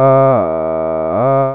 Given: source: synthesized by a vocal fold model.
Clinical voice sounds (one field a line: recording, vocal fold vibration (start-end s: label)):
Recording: sustained vowel that changes in the middle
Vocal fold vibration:
0.00-0.28 s: 134.3 Hz, open quotient 0.56
0.48-1.08 s: 80.1 Hz, open quotient 0.17
1.28-1.55 s: 134.3 Hz, open quotient 0.56